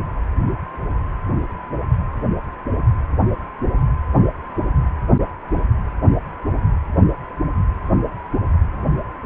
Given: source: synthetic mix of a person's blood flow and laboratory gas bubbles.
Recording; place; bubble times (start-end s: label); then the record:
Doppler ultrasound of blood flow; precordium
no bubbles
From the record:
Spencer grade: 0 (complete lack of bubble signals)